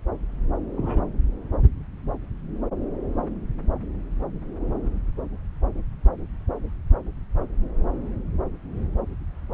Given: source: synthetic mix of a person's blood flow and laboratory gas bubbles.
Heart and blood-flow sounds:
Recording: Doppler ultrasound of blood flow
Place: subclavian vein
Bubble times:
0.77-1.01 s: bubbles
From the record:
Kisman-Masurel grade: 123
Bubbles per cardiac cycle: 1 to 2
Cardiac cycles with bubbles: 10 to 50%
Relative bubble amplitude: loud (0.450 to 0.775)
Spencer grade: 2 (many but less than half of the cardiac periods contain bubble signals, singularly or in groups)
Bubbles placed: anywhere in the cardiac cycle

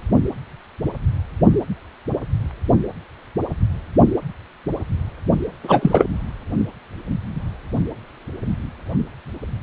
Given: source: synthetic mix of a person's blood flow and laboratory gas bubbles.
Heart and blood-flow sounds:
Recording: Doppler ultrasound of blood flow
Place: precordium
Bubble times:
5.63-6.06 s: bubbles
From the record:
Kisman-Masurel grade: 213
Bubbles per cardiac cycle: several, 3 to 8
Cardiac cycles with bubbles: 1 to 10%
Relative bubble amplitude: loud (0.450 to 0.775)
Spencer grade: 1 (occasional bubble signal discernible with the cardiac motion signal, with majority of cardiac periods free of bubbles)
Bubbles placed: anywhere in the cardiac cycle

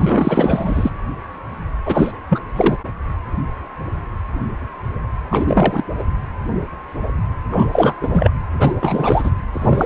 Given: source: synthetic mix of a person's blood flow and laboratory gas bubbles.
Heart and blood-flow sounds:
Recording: Doppler ultrasound of blood flow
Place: precordium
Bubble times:
0.00-0.91 s: bubbles
1.85-2.12 s: bubbles
2.29-2.40 s: bubbles
2.56-2.78 s: bubbles
5.30-5.83 s: bubbles
5.99-6.04 s: bubbles
7.51-7.67 s: bubbles
7.73-7.94 s: bubbles
8.03-8.30 s: bubbles
8.59-8.75 s: bubbles
8.81-9.31 s: bubbles
9.53-9.85 s: bubbles
From the record:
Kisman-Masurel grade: 333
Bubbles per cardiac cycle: rolling drumbeat, 9 or more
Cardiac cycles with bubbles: 50 to 99%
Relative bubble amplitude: loud (0.450 to 0.775)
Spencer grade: 3 (all of the cardiac periods contain showers or single bubble signals, but not dominating or overriding the cardiac motion signals)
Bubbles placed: anywhere in the cardiac cycle

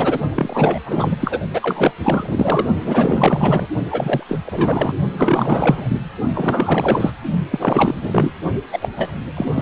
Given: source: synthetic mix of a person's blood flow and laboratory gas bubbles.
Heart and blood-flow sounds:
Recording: Doppler ultrasound of blood flow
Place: precordium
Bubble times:
0.00-0.19 s: bubbles
0.35-0.79 s: bubbles
0.85-1.16 s: bubbles
1.20-1.40 s: bubbles
1.52-1.92 s: bubbles
2.01-2.66 s: bubbles
2.80-3.67 s: bubbles
3.90-4.23 s: bubbles
4.28-4.38 s: bubbles
4.46-4.92 s: bubbles
5.16-6.00 s: bubbles
6.34-7.11 s: bubbles
7.50-7.99 s: bubbles
8.01-8.34 s: bubbles
8.72-8.88 s: bubbles
8.96-9.11 s: bubbles
9.36-9.62 s: bubbles
From the record:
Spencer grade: 4 (maximum detectable bubble signal sounding continuously throughout systole and diastole of every cardiac period, and overriding the amplitude of the normal cardiac signals)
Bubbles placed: only in the low amplitude regions of the cardiac cycle

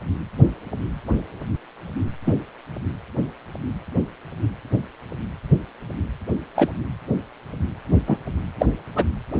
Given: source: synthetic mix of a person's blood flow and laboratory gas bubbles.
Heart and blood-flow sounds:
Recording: Doppler ultrasound of blood flow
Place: precordium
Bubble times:
2.26-2.39 s: bubbles
6.56-6.72 s: bubbles
8.06-8.18 s: bubbles
8.58-8.66 s: bubbles
8.96-9.05 s: bubbles
From the record:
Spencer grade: 2 (many but less than half of the cardiac periods contain bubble signals, singularly or in groups)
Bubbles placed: anywhere in the cardiac cycle

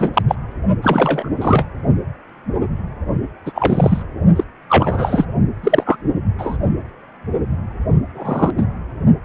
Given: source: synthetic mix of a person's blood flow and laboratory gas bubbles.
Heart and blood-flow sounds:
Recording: Doppler ultrasound of blood flow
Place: precordium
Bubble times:
0.00-0.22 s: bubbles
0.28-0.35 s: bubbles
0.82-1.30 s: bubbles
1.36-1.66 s: bubbles
3.46-3.52 s: bubbles
3.54-4.03 s: bubbles
4.36-4.44 s: bubbles
4.69-5.25 s: bubbles
5.63-5.96 s: bubbles
6.38-6.57 s: bubbles
8.13-8.53 s: bubbles
8.57-8.65 s: bubbles
From the record:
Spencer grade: 3 (all of the cardiac periods contain showers or single bubble signals, but not dominating or overriding the cardiac motion signals)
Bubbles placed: only in the low amplitude regions of the cardiac cycle

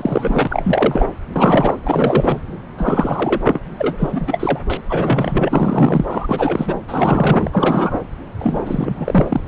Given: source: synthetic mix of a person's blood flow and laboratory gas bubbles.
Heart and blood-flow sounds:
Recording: Doppler ultrasound of blood flow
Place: subclavian vein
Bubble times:
0.00-1.07 s: bubbles
1.35-1.77 s: bubbles
1.84-2.42 s: bubbles
2.78-3.42 s: bubbles
3.45-3.60 s: bubbles
3.79-4.59 s: bubbles
4.69-4.77 s: bubbles
4.89-6.05 s: bubbles
6.10-6.76 s: bubbles
6.88-8.01 s: bubbles
8.39-9.41 s: bubbles
From the record:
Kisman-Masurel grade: 343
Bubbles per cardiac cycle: rolling drumbeat, 9 or more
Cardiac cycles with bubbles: 100%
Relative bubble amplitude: loud (0.450 to 0.775)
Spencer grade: 3 (all of the cardiac periods contain showers or single bubble signals, but not dominating or overriding the cardiac motion signals)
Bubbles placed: anywhere in the cardiac cycle

